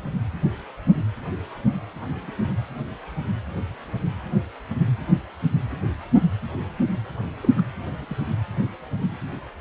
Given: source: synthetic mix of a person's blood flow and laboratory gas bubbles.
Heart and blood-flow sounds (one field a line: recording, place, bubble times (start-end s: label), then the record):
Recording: Doppler ultrasound of blood flow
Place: precordium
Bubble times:
2.21-2.31 s: bubbles
7.42-7.48 s: bubbles
7.57-7.62 s: bubbles
8.02-8.05 s: bubbles
8.09-8.31 s: bubbles
From the record:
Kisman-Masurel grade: 121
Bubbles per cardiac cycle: 1 to 2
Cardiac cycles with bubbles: 10 to 50%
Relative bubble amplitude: barely perceptible (0.100 to 0.250)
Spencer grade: 2 (many but less than half of the cardiac periods contain bubble signals, singularly or in groups)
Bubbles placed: anywhere in the cardiac cycle